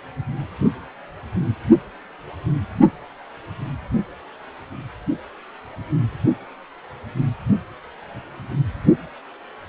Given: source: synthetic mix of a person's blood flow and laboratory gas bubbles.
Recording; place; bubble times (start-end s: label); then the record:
Doppler ultrasound of blood flow; precordium
no bubbles
From the record:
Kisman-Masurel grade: 000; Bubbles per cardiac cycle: 0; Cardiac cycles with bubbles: 0%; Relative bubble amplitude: no bubbles discernible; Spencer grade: 0 (complete lack of bubble signals)